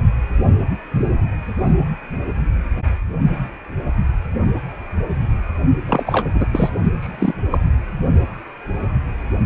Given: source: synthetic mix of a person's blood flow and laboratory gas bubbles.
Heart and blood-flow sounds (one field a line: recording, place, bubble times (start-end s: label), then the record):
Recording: Doppler ultrasound of blood flow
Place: precordium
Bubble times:
5.86-6.03 s: bubbles
6.06-6.27 s: bubbles
6.33-6.46 s: bubbles
6.52-6.70 s: bubbles
6.99-7.35 s: bubbles
7.50-7.58 s: bubbles
From the record:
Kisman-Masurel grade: 222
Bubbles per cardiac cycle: several, 3 to 8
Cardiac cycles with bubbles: 10 to 50%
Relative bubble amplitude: moderate (0.250 to 0.450)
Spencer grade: 2 (many but less than half of the cardiac periods contain bubble signals, singularly or in groups)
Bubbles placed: only in the low amplitude regions of the cardiac cycle